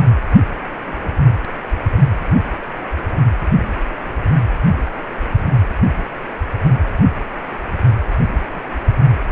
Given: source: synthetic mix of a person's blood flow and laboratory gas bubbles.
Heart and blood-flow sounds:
Doppler ultrasound of blood flow; precordium
0.86-1.13 s: bubbles
8.53-8.71 s: bubbles
From the record:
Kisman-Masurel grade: 121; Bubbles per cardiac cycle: 1 to 2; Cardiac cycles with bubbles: 10 to 50%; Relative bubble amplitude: barely perceptible (0.100 to 0.250); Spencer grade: 2 (many but less than half of the cardiac periods contain bubble signals, singularly or in groups); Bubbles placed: anywhere in the cardiac cycle

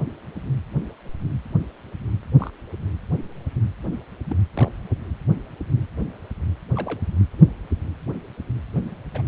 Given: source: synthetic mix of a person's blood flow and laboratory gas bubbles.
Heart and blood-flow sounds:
Doppler ultrasound of blood flow; precordium
2.40-2.50 s: bubbles
4.29-4.36 s: bubbles
4.55-4.70 s: bubbles
6.75-7.01 s: bubbles
9.13-9.23 s: bubbles
From the record:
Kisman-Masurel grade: 121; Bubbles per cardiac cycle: 1 to 2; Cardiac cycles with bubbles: 10 to 50%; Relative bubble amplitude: barely perceptible (0.100 to 0.250); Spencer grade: 2 (many but less than half of the cardiac periods contain bubble signals, singularly or in groups); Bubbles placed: anywhere in the cardiac cycle

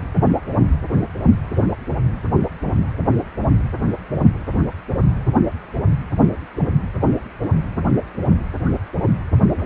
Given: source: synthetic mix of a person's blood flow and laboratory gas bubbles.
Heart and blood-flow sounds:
Doppler ultrasound of blood flow; precordium
9.55-9.66 s: bubbles
From the record:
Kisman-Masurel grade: 111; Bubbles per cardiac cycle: 1 to 2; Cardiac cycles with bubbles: 1 to 10%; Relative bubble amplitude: barely perceptible (0.100 to 0.250); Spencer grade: 1 (occasional bubble signal discernible with the cardiac motion signal, with majority of cardiac periods free of bubbles); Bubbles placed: anywhere in the cardiac cycle

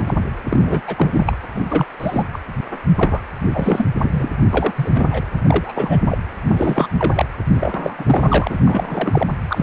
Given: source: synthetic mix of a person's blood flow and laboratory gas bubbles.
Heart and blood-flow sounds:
Doppler ultrasound of blood flow; precordium
0.00-0.04 s: bubbles
0.06-0.14 s: bubbles
0.47-0.82 s: bubbles
0.86-1.39 s: bubbles
1.54-1.66 s: bubbles
1.69-1.85 s: bubbles
1.99-2.24 s: bubbles
2.32-2.39 s: bubbles
2.97-3.21 s: bubbles
3.52-3.87 s: bubbles
4.01-4.29 s: bubbles
4.51-4.72 s: bubbles
4.76-4.89 s: bubbles
4.93-5.06 s: bubbles
5.10-5.21 s: bubbles
5.38-5.40 s: bubbles
5.46-5.98 s: bubbles
6.06-6.18 s: bubbles
6.43-6.88 s: bubbles
6.97-7.25 s: bubbles
7.54-8.59 s: bubbles
8.63-9.27 s: bubbles
9.49-9.63 s: bubbles
From the record:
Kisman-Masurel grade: 343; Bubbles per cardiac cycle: rolling drumbeat, 9 or more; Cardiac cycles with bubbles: 100%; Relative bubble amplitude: loud (0.450 to 0.775); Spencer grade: 3 (all of the cardiac periods contain showers or single bubble signals, but not dominating or overriding the cardiac motion signals); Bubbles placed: anywhere in the cardiac cycle

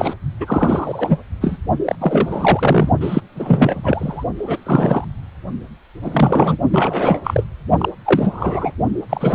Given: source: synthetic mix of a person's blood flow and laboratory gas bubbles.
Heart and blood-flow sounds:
Doppler ultrasound of blood flow; precordium
0.00-0.14 s: bubbles
0.40-1.17 s: bubbles
1.41-1.58 s: bubbles
1.85-1.96 s: bubbles
2.00-2.89 s: bubbles
3.00-3.21 s: bubbles
3.35-4.24 s: bubbles
4.38-5.04 s: bubbles
6.02-6.58 s: bubbles
6.70-7.20 s: bubbles
7.24-7.47 s: bubbles
7.78-7.89 s: bubbles
8.04-8.72 s: bubbles
9.09-9.35 s: bubbles
From the record:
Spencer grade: 3 (all of the cardiac periods contain showers or single bubble signals, but not dominating or overriding the cardiac motion signals); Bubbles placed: only in the low amplitude regions of the cardiac cycle

